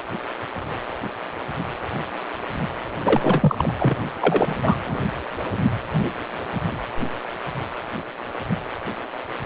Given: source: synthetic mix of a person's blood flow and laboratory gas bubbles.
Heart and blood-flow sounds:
Doppler ultrasound of blood flow; precordium
3.00-3.73 s: bubbles
3.78-3.97 s: bubbles
4.21-4.75 s: bubbles
4.87-5.05 s: bubbles
From the record:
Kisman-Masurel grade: 222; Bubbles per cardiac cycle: several, 3 to 8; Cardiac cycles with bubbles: 10 to 50%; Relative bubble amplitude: moderate (0.250 to 0.450); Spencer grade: 2 (many but less than half of the cardiac periods contain bubble signals, singularly or in groups); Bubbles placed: anywhere in the cardiac cycle

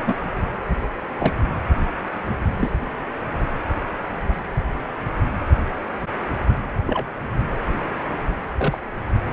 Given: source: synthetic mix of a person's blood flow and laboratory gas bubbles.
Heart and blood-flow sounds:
Doppler ultrasound of blood flow; precordium
0.06-0.18 s: bubbles
1.18-1.33 s: bubbles
2.60-2.71 s: bubbles
6.86-7.08 s: bubbles
8.58-8.78 s: bubbles
From the record:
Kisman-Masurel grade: 122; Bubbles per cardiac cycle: 1 to 2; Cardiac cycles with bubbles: 10 to 50%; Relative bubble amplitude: moderate (0.250 to 0.450); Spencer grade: 2 (many but less than half of the cardiac periods contain bubble signals, singularly or in groups); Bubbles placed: anywhere in the cardiac cycle

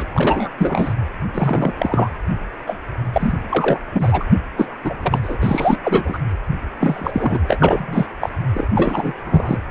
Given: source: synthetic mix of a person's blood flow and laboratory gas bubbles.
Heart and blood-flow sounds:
Doppler ultrasound of blood flow; precordium
0.00-0.05 s: bubbles
0.14-0.49 s: bubbles
0.58-0.93 s: bubbles
1.34-1.73 s: bubbles
1.78-2.18 s: bubbles
2.67-2.78 s: bubbles
3.12-3.35 s: bubbles
3.49-3.79 s: bubbles
3.93-4.25 s: bubbles
4.57-4.68 s: bubbles
4.83-4.94 s: bubbles
5.03-5.20 s: bubbles
5.23-5.37 s: bubbles
5.42-5.78 s: bubbles
5.83-6.19 s: bubbles
6.79-7.45 s: bubbles
7.48-8.06 s: bubbles
8.21-8.29 s: bubbles
8.54-8.67 s: bubbles
8.75-9.59 s: bubbles
From the record:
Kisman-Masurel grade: 343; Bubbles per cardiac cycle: rolling drumbeat, 9 or more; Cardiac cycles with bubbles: 100%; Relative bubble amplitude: loud (0.450 to 0.775); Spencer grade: 3 (all of the cardiac periods contain showers or single bubble signals, but not dominating or overriding the cardiac motion signals); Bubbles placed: anywhere in the cardiac cycle

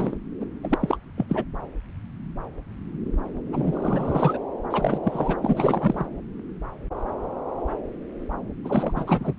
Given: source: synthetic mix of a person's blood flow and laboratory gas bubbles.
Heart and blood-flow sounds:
Doppler ultrasound of blood flow; subclavian vein
0.00-0.17 s: bubbles
0.40-0.46 s: bubbles
0.64-0.97 s: bubbles
1.17-1.26 s: bubbles
1.29-1.44 s: bubbles
3.53-4.38 s: bubbles
4.70-5.00 s: bubbles
5.03-5.36 s: bubbles
5.42-6.06 s: bubbles
8.64-8.92 s: bubbles
8.96-9.04 s: bubbles
9.06-9.33 s: bubbles
From the record:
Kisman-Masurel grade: 332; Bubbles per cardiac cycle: rolling drumbeat, 9 or more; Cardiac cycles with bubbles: 50 to 99%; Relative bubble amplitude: moderate (0.250 to 0.450); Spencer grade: 3 (all of the cardiac periods contain showers or single bubble signals, but not dominating or overriding the cardiac motion signals); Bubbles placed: anywhere in the cardiac cycle

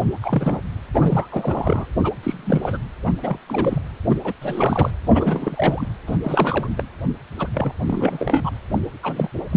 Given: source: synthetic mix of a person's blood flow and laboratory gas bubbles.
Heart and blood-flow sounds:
Doppler ultrasound of blood flow; precordium
0.22-0.60 s: bubbles
0.94-1.27 s: bubbles
1.30-1.85 s: bubbles
2.03-2.12 s: bubbles
2.23-2.78 s: bubbles
3.06-3.12 s: bubbles
3.23-3.38 s: bubbles
3.48-3.81 s: bubbles
4.09-4.15 s: bubbles
4.24-4.33 s: bubbles
4.42-4.91 s: bubbles
5.04-5.87 s: bubbles
6.07-6.17 s: bubbles
6.23-6.67 s: bubbles
6.77-6.83 s: bubbles
7.38-7.48 s: bubbles
7.54-7.72 s: bubbles
7.86-8.50 s: bubbles
8.71-8.79 s: bubbles
9.03-9.30 s: bubbles
9.52-9.57 s: bubbles
From the record:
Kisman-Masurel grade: 342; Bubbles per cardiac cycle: rolling drumbeat, 9 or more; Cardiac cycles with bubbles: 100%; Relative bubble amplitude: moderate (0.250 to 0.450); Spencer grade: 3 (all of the cardiac periods contain showers or single bubble signals, but not dominating or overriding the cardiac motion signals); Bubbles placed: anywhere in the cardiac cycle

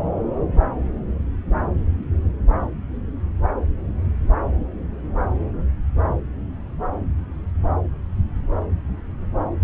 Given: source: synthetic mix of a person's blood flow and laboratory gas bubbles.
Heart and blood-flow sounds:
Doppler ultrasound of blood flow; subclavian vein
no bubbles
From the record:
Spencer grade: 0 (complete lack of bubble signals)

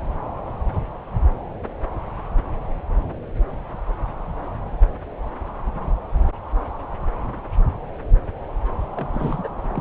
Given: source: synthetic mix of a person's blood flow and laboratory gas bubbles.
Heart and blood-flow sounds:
Doppler ultrasound of blood flow; subclavian vein
8.95-9.07 s: bubbles
9.13-9.49 s: bubbles
9.71-9.81 s: bubbles
From the record:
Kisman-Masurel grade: 211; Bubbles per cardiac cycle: several, 3 to 8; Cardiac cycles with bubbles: 1 to 10%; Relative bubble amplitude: barely perceptible (0.100 to 0.250); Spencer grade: 1 (occasional bubble signal discernible with the cardiac motion signal, with majority of cardiac periods free of bubbles); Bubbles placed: anywhere in the cardiac cycle

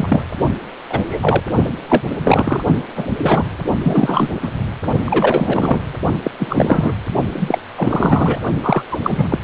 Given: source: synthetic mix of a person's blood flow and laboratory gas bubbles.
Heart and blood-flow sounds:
Doppler ultrasound of blood flow; precordium
0.00-0.24 s: bubbles
0.37-0.53 s: bubbles
0.89-1.43 s: bubbles
1.65-1.70 s: bubbles
1.89-2.02 s: bubbles
2.24-2.63 s: bubbles
2.67-2.80 s: bubbles
2.95-3.07 s: bubbles
3.17-3.45 s: bubbles
3.83-4.30 s: bubbles
4.42-4.50 s: bubbles
5.06-5.81 s: bubbles
6.23-6.31 s: bubbles
6.39-6.92 s: bubbles
7.33-7.58 s: bubbles
7.77-8.38 s: bubbles
8.63-8.82 s: bubbles
8.91-8.97 s: bubbles
9.02-9.39 s: bubbles
From the record:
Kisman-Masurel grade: 333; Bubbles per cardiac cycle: rolling drumbeat, 9 or more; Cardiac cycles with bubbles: 50 to 99%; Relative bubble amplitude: loud (0.450 to 0.775); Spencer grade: 3 (all of the cardiac periods contain showers or single bubble signals, but not dominating or overriding the cardiac motion signals); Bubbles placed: only in the low amplitude regions of the cardiac cycle

